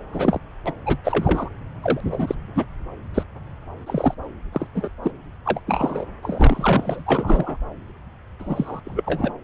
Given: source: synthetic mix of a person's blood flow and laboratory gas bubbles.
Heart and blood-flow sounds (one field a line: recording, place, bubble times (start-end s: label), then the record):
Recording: Doppler ultrasound of blood flow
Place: subclavian vein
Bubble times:
0.12-0.39 s: bubbles
0.66-0.72 s: bubbles
0.85-0.97 s: bubbles
1.04-1.50 s: bubbles
1.82-2.35 s: bubbles
2.54-2.65 s: bubbles
3.14-3.23 s: bubbles
3.86-4.15 s: bubbles
4.53-4.67 s: bubbles
4.75-4.88 s: bubbles
5.03-5.11 s: bubbles
5.45-5.60 s: bubbles
5.67-6.05 s: bubbles
6.22-7.58 s: bubbles
8.39-8.80 s: bubbles
8.85-9.32 s: bubbles
From the record:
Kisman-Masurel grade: 242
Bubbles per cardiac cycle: several, 3 to 8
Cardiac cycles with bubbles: 100%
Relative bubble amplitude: moderate (0.250 to 0.450)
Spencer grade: 3 (all of the cardiac periods contain showers or single bubble signals, but not dominating or overriding the cardiac motion signals)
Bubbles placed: anywhere in the cardiac cycle